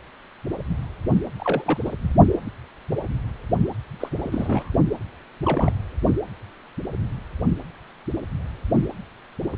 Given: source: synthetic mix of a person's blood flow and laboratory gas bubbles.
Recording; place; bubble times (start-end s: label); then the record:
Doppler ultrasound of blood flow; precordium
1.39-1.78 s: bubbles
1.85-1.92 s: bubbles
4.00-4.71 s: bubbles
5.43-5.72 s: bubbles
From the record:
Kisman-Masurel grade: 221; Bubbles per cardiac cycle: several, 3 to 8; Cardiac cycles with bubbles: 10 to 50%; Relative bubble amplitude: barely perceptible (0.100 to 0.250); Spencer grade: 2 (many but less than half of the cardiac periods contain bubble signals, singularly or in groups); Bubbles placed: only in the low amplitude regions of the cardiac cycle